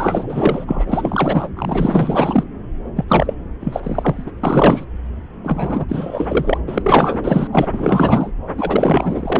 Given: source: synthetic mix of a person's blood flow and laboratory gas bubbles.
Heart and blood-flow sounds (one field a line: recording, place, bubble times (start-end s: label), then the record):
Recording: Doppler ultrasound of blood flow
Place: subclavian vein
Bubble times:
0.00-1.49 s: bubbles
1.57-2.44 s: bubbles
2.96-3.04 s: bubbles
3.08-3.34 s: bubbles
3.60-3.80 s: bubbles
3.83-4.32 s: bubbles
4.43-4.85 s: bubbles
5.43-5.85 s: bubbles
5.88-6.59 s: bubbles
6.67-7.47 s: bubbles
7.51-7.68 s: bubbles
7.72-8.33 s: bubbles
8.57-9.40 s: bubbles
From the record:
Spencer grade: 4 (maximum detectable bubble signal sounding continuously throughout systole and diastole of every cardiac period, and overriding the amplitude of the normal cardiac signals)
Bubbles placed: anywhere in the cardiac cycle